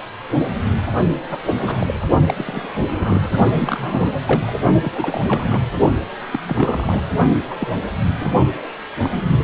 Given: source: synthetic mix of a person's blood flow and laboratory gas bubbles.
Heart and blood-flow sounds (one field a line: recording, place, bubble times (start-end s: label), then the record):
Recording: Doppler ultrasound of blood flow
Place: precordium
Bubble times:
1.30-1.39 s: bubbles
1.46-2.00 s: bubbles
2.26-2.34 s: bubbles
2.36-2.73 s: bubbles
2.86-3.35 s: bubbles
3.55-4.12 s: bubbles
4.24-4.53 s: bubbles
4.83-4.92 s: bubbles
4.95-5.21 s: bubbles
5.27-5.62 s: bubbles
6.32-6.39 s: bubbles
6.46-7.03 s: bubbles
7.50-7.57 s: bubbles
7.60-7.67 s: bubbles
8.21-8.30 s: bubbles
8.98-9.23 s: bubbles
9.39-9.44 s: bubbles
From the record:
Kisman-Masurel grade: 242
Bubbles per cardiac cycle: several, 3 to 8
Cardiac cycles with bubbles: 100%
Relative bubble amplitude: moderate (0.250 to 0.450)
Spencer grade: 3 (all of the cardiac periods contain showers or single bubble signals, but not dominating or overriding the cardiac motion signals)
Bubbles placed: only in the low amplitude regions of the cardiac cycle